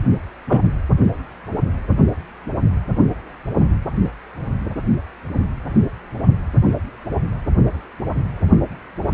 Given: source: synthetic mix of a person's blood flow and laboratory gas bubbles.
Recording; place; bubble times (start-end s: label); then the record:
Doppler ultrasound of blood flow; precordium
0.47-0.61 s: bubbles
From the record:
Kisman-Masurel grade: 113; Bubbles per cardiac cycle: 1 to 2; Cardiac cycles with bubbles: 1 to 10%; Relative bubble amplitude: loud (0.450 to 0.775); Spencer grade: 1 (occasional bubble signal discernible with the cardiac motion signal, with majority of cardiac periods free of bubbles); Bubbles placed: only in the low amplitude regions of the cardiac cycle